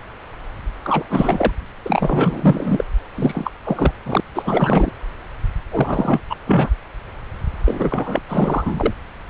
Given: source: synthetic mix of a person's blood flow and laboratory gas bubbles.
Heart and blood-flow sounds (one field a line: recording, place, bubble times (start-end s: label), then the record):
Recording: Doppler ultrasound of blood flow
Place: subclavian vein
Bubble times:
0.84-1.03 s: bubbles
1.09-1.51 s: bubbles
1.85-2.85 s: bubbles
3.15-3.51 s: bubbles
3.64-3.94 s: bubbles
4.05-4.21 s: bubbles
4.35-4.91 s: bubbles
5.71-6.20 s: bubbles
6.29-6.36 s: bubbles
6.46-6.71 s: bubbles
7.65-8.22 s: bubbles
8.29-8.94 s: bubbles
From the record:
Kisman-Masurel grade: 333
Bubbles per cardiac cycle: rolling drumbeat, 9 or more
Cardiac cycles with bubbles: 50 to 99%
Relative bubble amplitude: loud (0.450 to 0.775)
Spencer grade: 3 (all of the cardiac periods contain showers or single bubble signals, but not dominating or overriding the cardiac motion signals)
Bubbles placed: anywhere in the cardiac cycle